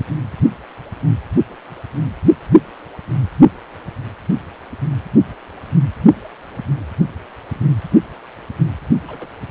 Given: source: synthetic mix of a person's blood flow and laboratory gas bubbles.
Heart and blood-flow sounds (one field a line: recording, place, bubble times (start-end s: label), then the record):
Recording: Doppler ultrasound of blood flow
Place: precordium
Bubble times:
9.08-9.31 s: bubbles
From the record:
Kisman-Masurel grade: 111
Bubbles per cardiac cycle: 1 to 2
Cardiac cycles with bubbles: 1 to 10%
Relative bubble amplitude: barely perceptible (0.100 to 0.250)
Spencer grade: 1 (occasional bubble signal discernible with the cardiac motion signal, with majority of cardiac periods free of bubbles)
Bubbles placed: only in the low amplitude regions of the cardiac cycle